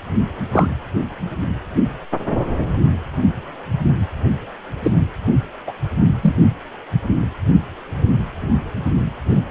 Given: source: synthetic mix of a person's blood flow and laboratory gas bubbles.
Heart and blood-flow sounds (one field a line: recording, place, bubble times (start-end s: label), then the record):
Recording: Doppler ultrasound of blood flow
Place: precordium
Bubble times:
0.52-0.68 s: bubbles
4.83-4.92 s: bubbles
5.67-5.73 s: bubbles
6.23-6.35 s: bubbles
From the record:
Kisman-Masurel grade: 123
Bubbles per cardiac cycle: 1 to 2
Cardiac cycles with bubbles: 10 to 50%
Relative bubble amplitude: loud (0.450 to 0.775)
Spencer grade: 2 (many but less than half of the cardiac periods contain bubble signals, singularly or in groups)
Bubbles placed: only in the low amplitude regions of the cardiac cycle